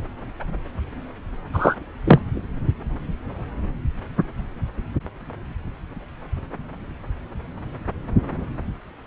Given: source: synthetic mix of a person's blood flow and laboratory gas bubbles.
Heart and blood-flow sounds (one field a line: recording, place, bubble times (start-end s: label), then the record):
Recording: Doppler ultrasound of blood flow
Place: subclavian vein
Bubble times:
1.53-1.76 s: bubbles
2.05-2.20 s: bubbles
From the record:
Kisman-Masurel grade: 113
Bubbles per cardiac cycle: 1 to 2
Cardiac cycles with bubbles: 1 to 10%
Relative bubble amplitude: loud (0.450 to 0.775)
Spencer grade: 1 (occasional bubble signal discernible with the cardiac motion signal, with majority of cardiac periods free of bubbles)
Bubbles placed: anywhere in the cardiac cycle